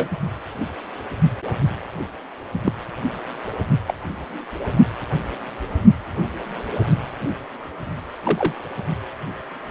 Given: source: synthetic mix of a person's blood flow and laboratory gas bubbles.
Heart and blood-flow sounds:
Doppler ultrasound of blood flow; precordium
0.00-0.07 s: bubbles
2.64-2.73 s: bubbles
3.88-3.94 s: bubbles
8.24-8.53 s: bubbles
From the record:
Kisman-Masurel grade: 122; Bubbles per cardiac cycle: 1 to 2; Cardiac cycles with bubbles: 10 to 50%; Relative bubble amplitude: moderate (0.250 to 0.450); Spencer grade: 2 (many but less than half of the cardiac periods contain bubble signals, singularly or in groups); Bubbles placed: only in the low amplitude regions of the cardiac cycle

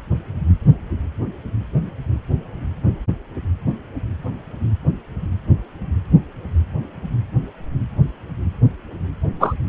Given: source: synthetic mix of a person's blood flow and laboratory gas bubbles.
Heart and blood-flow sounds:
Doppler ultrasound of blood flow; precordium
9.40-9.54 s: bubbles
From the record:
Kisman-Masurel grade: 113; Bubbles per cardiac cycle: 1 to 2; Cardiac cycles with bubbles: 1 to 10%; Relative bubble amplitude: loud (0.450 to 0.775); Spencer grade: 1 (occasional bubble signal discernible with the cardiac motion signal, with majority of cardiac periods free of bubbles); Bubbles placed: anywhere in the cardiac cycle

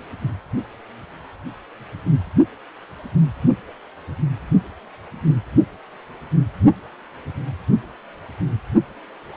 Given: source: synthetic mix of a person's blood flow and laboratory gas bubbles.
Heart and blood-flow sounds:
Doppler ultrasound of blood flow; precordium
no bubbles
From the record:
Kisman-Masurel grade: 000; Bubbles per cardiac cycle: 0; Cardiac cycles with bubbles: 0%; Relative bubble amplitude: no bubbles discernible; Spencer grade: 0 (complete lack of bubble signals)

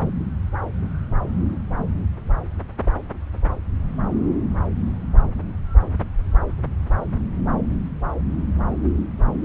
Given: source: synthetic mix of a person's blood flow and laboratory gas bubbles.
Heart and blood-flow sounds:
Doppler ultrasound of blood flow; subclavian vein
no bubbles
From the record:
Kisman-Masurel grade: 000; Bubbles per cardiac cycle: 0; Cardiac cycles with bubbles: 0%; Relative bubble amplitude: no bubbles discernible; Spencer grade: 0 (complete lack of bubble signals)

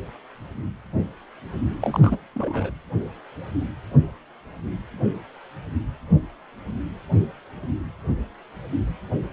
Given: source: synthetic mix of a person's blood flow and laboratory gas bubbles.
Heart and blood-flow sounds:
Doppler ultrasound of blood flow; precordium
1.81-2.18 s: bubbles
2.35-2.71 s: bubbles
From the record:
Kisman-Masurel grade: 212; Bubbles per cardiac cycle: several, 3 to 8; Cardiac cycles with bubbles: 1 to 10%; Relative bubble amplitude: moderate (0.250 to 0.450); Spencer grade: 1 (occasional bubble signal discernible with the cardiac motion signal, with majority of cardiac periods free of bubbles); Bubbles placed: anywhere in the cardiac cycle

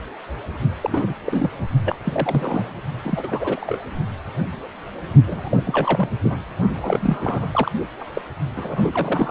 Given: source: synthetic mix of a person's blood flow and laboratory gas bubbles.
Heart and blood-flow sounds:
Doppler ultrasound of blood flow; precordium
0.81-1.15 s: bubbles
1.26-1.64 s: bubbles
1.84-1.96 s: bubbles
2.04-2.81 s: bubbles
3.04-3.78 s: bubbles
5.25-6.10 s: bubbles
6.23-6.37 s: bubbles
6.74-7.71 s: bubbles
8.00-8.04 s: bubbles
8.14-8.21 s: bubbles
8.56-9.31 s: bubbles
From the record:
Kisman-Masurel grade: 332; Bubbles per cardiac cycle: rolling drumbeat, 9 or more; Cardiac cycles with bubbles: 50 to 99%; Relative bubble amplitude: moderate (0.250 to 0.450); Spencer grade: 3 (all of the cardiac periods contain showers or single bubble signals, but not dominating or overriding the cardiac motion signals); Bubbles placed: only in the low amplitude regions of the cardiac cycle

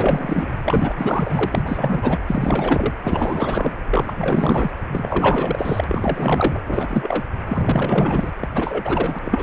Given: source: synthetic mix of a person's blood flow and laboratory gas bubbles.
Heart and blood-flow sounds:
Doppler ultrasound of blood flow; precordium
0.00-0.56 s: bubbles
0.64-2.19 s: bubbles
2.27-2.95 s: bubbles
3.03-3.75 s: bubbles
3.91-4.75 s: bubbles
4.92-5.84 s: bubbles
5.87-6.60 s: bubbles
6.67-7.24 s: bubbles
7.46-8.31 s: bubbles
8.40-8.48 s: bubbles
8.54-9.19 s: bubbles
9.24-9.43 s: bubbles
From the record:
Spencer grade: 4 (maximum detectable bubble signal sounding continuously throughout systole and diastole of every cardiac period, and overriding the amplitude of the normal cardiac signals); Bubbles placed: anywhere in the cardiac cycle

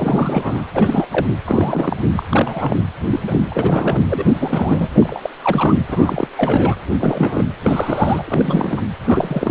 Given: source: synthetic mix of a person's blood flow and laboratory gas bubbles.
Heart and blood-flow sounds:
Doppler ultrasound of blood flow; precordium
0.00-0.66 s: bubbles
0.73-1.06 s: bubbles
1.10-1.36 s: bubbles
1.46-1.96 s: bubbles
2.17-2.26 s: bubbles
2.31-2.83 s: bubbles
3.09-3.19 s: bubbles
3.26-3.40 s: bubbles
3.50-4.00 s: bubbles
4.09-4.88 s: bubbles
4.93-5.20 s: bubbles
5.23-5.29 s: bubbles
5.42-5.75 s: bubbles
5.88-6.28 s: bubbles
6.37-6.80 s: bubbles
7.00-7.43 s: bubbles
7.62-8.23 s: bubbles
8.25-8.81 s: bubbles
9.05-9.50 s: bubbles
From the record:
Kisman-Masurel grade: 342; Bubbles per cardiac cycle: rolling drumbeat, 9 or more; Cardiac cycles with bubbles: 100%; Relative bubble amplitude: moderate (0.250 to 0.450); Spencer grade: 3 (all of the cardiac periods contain showers or single bubble signals, but not dominating or overriding the cardiac motion signals); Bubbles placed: anywhere in the cardiac cycle

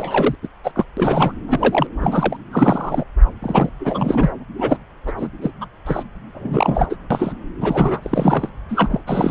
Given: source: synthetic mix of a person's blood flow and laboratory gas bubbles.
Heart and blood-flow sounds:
Doppler ultrasound of blood flow; subclavian vein
0.00-0.36 s: bubbles
0.42-0.47 s: bubbles
0.64-0.71 s: bubbles
0.75-0.84 s: bubbles
0.97-1.32 s: bubbles
1.47-1.87 s: bubbles
2.00-2.36 s: bubbles
2.52-3.04 s: bubbles
3.42-3.69 s: bubbles
3.79-4.33 s: bubbles
4.58-4.78 s: bubbles
5.07-5.12 s: bubbles
5.17-5.28 s: bubbles
5.42-5.50 s: bubbles
5.60-5.66 s: bubbles
5.86-6.03 s: bubbles
6.34-6.96 s: bubbles
7.10-7.33 s: bubbles
7.60-8.50 s: bubbles
8.69-9.01 s: bubbles
9.07-9.31 s: bubbles
From the record:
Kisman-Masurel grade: 242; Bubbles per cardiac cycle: several, 3 to 8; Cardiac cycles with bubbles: 100%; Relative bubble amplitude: moderate (0.250 to 0.450); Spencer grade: 3 (all of the cardiac periods contain showers or single bubble signals, but not dominating or overriding the cardiac motion signals); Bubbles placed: anywhere in the cardiac cycle

